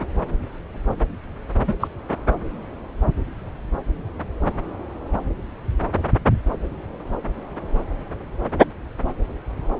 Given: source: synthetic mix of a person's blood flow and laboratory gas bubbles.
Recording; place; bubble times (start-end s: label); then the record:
Doppler ultrasound of blood flow; subclavian vein
1.67-1.74 s: bubbles
1.79-1.88 s: bubbles
From the record:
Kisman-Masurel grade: 112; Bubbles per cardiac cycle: 1 to 2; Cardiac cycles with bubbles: 1 to 10%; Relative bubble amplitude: moderate (0.250 to 0.450); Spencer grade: 1 (occasional bubble signal discernible with the cardiac motion signal, with majority of cardiac periods free of bubbles); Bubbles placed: anywhere in the cardiac cycle